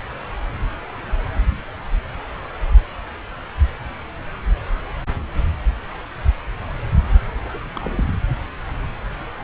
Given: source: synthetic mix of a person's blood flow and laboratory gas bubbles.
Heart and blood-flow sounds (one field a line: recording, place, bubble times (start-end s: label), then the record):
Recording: Doppler ultrasound of blood flow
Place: subclavian vein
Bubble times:
7.45-7.59 s: bubbles
7.73-8.04 s: bubbles
From the record:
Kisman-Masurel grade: 211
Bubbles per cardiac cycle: several, 3 to 8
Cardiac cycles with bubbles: 1 to 10%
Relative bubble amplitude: barely perceptible (0.100 to 0.250)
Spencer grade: 1 (occasional bubble signal discernible with the cardiac motion signal, with majority of cardiac periods free of bubbles)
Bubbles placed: anywhere in the cardiac cycle